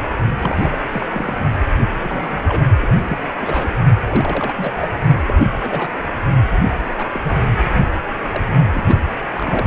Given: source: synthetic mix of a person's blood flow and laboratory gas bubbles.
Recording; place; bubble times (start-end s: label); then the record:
Doppler ultrasound of blood flow; precordium
0.00-0.06 s: bubbles
0.38-0.78 s: bubbles
0.90-1.06 s: bubbles
1.09-1.34 s: bubbles
2.02-2.62 s: bubbles
2.82-2.88 s: bubbles
3.06-3.22 s: bubbles
3.42-3.70 s: bubbles
4.08-4.54 s: bubbles
4.56-4.72 s: bubbles
4.77-4.88 s: bubbles
5.26-5.40 s: bubbles
5.59-5.88 s: bubbles
6.98-7.06 s: bubbles
7.13-7.19 s: bubbles
7.23-7.41 s: bubbles
7.86-7.94 s: bubbles
8.30-8.43 s: bubbles
8.73-8.84 s: bubbles
8.88-8.99 s: bubbles
9.33-9.67 s: bubbles
From the record:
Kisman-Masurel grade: 242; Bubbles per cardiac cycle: several, 3 to 8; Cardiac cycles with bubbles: 100%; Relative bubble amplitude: moderate (0.250 to 0.450); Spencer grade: 3 (all of the cardiac periods contain showers or single bubble signals, but not dominating or overriding the cardiac motion signals); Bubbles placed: only in the low amplitude regions of the cardiac cycle